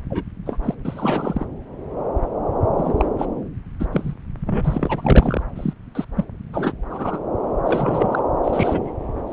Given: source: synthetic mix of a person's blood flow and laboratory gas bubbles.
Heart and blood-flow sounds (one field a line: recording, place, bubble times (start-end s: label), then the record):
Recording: Doppler ultrasound of blood flow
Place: subclavian vein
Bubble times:
0.10-0.23 s: bubbles
0.45-0.58 s: bubbles
0.62-0.74 s: bubbles
0.85-1.45 s: bubbles
2.77-2.94 s: bubbles
2.97-3.05 s: bubbles
3.18-3.25 s: bubbles
3.79-3.87 s: bubbles
3.92-4.14 s: bubbles
4.46-5.42 s: bubbles
5.55-5.74 s: bubbles
5.95-6.05 s: bubbles
6.16-6.24 s: bubbles
6.53-6.72 s: bubbles
6.90-7.20 s: bubbles
7.65-8.22 s: bubbles
8.44-8.92 s: bubbles
9.28-9.33 s: bubbles
From the record:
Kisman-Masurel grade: 232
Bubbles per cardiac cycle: several, 3 to 8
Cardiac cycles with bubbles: 50 to 99%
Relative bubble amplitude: moderate (0.250 to 0.450)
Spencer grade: 3 (all of the cardiac periods contain showers or single bubble signals, but not dominating or overriding the cardiac motion signals)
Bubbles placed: anywhere in the cardiac cycle